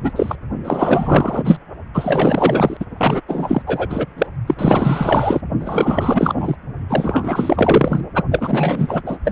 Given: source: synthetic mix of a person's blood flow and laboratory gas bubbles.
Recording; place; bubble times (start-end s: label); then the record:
Doppler ultrasound of blood flow; precordium
0.03-0.12 s: bubbles
0.15-0.36 s: bubbles
0.65-1.59 s: bubbles
1.94-2.77 s: bubbles
2.79-2.85 s: bubbles
2.97-3.21 s: bubbles
3.28-3.62 s: bubbles
3.66-4.05 s: bubbles
4.17-4.26 s: bubbles
4.46-4.55 s: bubbles
4.58-5.41 s: bubbles
5.60-6.55 s: bubbles
6.88-8.01 s: bubbles
8.15-8.23 s: bubbles
8.31-9.03 s: bubbles
9.06-9.17 s: bubbles
9.24-9.32 s: bubbles
From the record:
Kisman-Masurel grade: 444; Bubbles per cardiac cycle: continuous sound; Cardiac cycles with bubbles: 100%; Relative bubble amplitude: maximal (0.775 to 0.999); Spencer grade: 4 (maximum detectable bubble signal sounding continuously throughout systole and diastole of every cardiac period, and overriding the amplitude of the normal cardiac signals); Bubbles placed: only in the low amplitude regions of the cardiac cycle